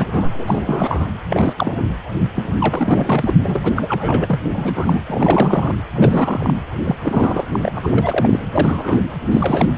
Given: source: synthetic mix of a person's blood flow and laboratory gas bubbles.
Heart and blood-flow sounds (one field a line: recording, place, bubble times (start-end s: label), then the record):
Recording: Doppler ultrasound of blood flow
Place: precordium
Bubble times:
0.00-0.06 s: bubbles
0.11-0.30 s: bubbles
0.32-1.07 s: bubbles
1.30-1.53 s: bubbles
1.56-1.82 s: bubbles
2.35-2.50 s: bubbles
2.59-3.34 s: bubbles
3.44-3.60 s: bubbles
3.62-4.40 s: bubbles
4.53-5.01 s: bubbles
5.08-5.75 s: bubbles
5.95-6.54 s: bubbles
6.84-6.96 s: bubbles
7.01-7.46 s: bubbles
7.51-7.79 s: bubbles
7.83-8.40 s: bubbles
8.52-8.98 s: bubbles
9.32-9.68 s: bubbles
From the record:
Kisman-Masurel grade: 342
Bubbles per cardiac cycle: rolling drumbeat, 9 or more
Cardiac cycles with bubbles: 100%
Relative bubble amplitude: moderate (0.250 to 0.450)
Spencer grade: 3 (all of the cardiac periods contain showers or single bubble signals, but not dominating or overriding the cardiac motion signals)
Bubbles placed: anywhere in the cardiac cycle